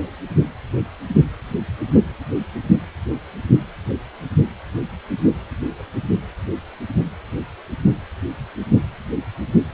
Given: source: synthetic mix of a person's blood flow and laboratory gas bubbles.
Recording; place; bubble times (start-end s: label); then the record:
Doppler ultrasound of blood flow; precordium
no bubbles
From the record:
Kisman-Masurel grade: 000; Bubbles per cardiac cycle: 0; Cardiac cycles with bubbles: 0%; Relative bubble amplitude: no bubbles discernible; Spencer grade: 0 (complete lack of bubble signals)